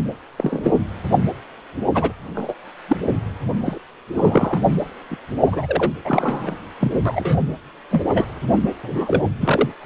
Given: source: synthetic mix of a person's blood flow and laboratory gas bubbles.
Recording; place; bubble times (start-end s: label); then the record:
Doppler ultrasound of blood flow; precordium
0.37-0.80 s: bubbles
1.94-2.12 s: bubbles
2.35-2.54 s: bubbles
2.89-2.97 s: bubbles
3.66-3.79 s: bubbles
4.13-4.63 s: bubbles
5.10-5.16 s: bubbles
5.44-5.91 s: bubbles
6.04-6.54 s: bubbles
6.80-6.92 s: bubbles
7.05-7.38 s: bubbles
7.90-8.31 s: bubbles
8.82-9.23 s: bubbles
9.40-9.69 s: bubbles
From the record:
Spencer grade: 3 (all of the cardiac periods contain showers or single bubble signals, but not dominating or overriding the cardiac motion signals); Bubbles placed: anywhere in the cardiac cycle